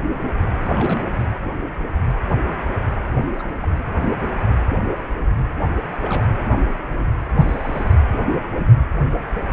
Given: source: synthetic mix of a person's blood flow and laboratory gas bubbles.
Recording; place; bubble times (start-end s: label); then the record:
Doppler ultrasound of blood flow; precordium
0.66-1.25 s: bubbles
3.19-3.25 s: bubbles
3.32-3.48 s: bubbles
3.62-3.71 s: bubbles
3.78-3.84 s: bubbles
6.01-6.25 s: bubbles
7.37-7.96 s: bubbles
From the record:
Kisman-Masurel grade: 221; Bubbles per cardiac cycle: several, 3 to 8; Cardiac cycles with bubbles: 10 to 50%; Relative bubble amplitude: barely perceptible (0.100 to 0.250); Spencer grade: 2 (many but less than half of the cardiac periods contain bubble signals, singularly or in groups); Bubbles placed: anywhere in the cardiac cycle